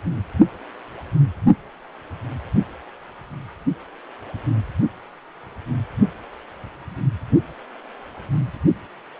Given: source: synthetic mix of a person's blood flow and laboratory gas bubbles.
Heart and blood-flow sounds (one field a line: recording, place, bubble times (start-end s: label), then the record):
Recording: Doppler ultrasound of blood flow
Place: precordium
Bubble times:
no bubbles
From the record:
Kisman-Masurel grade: 000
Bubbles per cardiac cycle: 0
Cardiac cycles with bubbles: 0%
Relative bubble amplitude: no bubbles discernible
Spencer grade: 0 (complete lack of bubble signals)